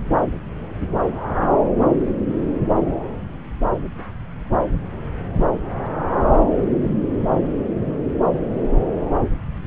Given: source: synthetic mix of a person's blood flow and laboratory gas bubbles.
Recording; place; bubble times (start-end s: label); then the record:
Doppler ultrasound of blood flow; subclavian vein
no bubbles
From the record:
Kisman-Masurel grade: 000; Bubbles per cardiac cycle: 0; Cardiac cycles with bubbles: 0%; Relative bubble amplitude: no bubbles discernible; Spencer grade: 0 (complete lack of bubble signals)